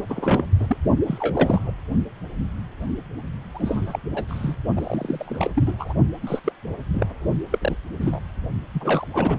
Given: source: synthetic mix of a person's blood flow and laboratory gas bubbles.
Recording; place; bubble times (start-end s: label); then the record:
Doppler ultrasound of blood flow; precordium
0.09-0.77 s: bubbles
1.06-1.71 s: bubbles
3.54-4.00 s: bubbles
4.13-4.25 s: bubbles
4.28-4.55 s: bubbles
4.76-5.50 s: bubbles
5.55-5.75 s: bubbles
5.79-5.93 s: bubbles
6.22-6.39 s: bubbles
6.44-6.53 s: bubbles
6.93-7.06 s: bubbles
7.50-7.75 s: bubbles
8.01-8.19 s: bubbles
8.74-9.07 s: bubbles
9.14-9.39 s: bubbles
From the record:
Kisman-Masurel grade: 232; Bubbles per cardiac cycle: several, 3 to 8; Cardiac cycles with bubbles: 50 to 99%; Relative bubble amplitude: moderate (0.250 to 0.450); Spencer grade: 3 (all of the cardiac periods contain showers or single bubble signals, but not dominating or overriding the cardiac motion signals); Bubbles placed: only in the low amplitude regions of the cardiac cycle